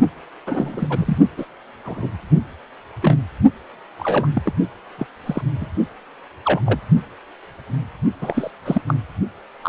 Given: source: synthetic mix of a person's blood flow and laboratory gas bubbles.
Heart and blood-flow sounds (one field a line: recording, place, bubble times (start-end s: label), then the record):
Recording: Doppler ultrasound of blood flow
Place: precordium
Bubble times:
0.47-1.18 s: bubbles
1.38-1.45 s: bubbles
1.84-2.08 s: bubbles
3.02-3.17 s: bubbles
3.99-4.27 s: bubbles
4.34-4.54 s: bubbles
4.98-5.07 s: bubbles
5.26-5.43 s: bubbles
5.61-5.66 s: bubbles
6.45-6.61 s: bubbles
6.66-6.81 s: bubbles
8.21-8.50 s: bubbles
8.65-8.81 s: bubbles
8.88-8.94 s: bubbles
9.62-9.69 s: bubbles
From the record:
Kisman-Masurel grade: 232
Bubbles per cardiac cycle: several, 3 to 8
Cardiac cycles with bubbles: 50 to 99%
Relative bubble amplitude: moderate (0.250 to 0.450)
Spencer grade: 3 (all of the cardiac periods contain showers or single bubble signals, but not dominating or overriding the cardiac motion signals)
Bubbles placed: only in the low amplitude regions of the cardiac cycle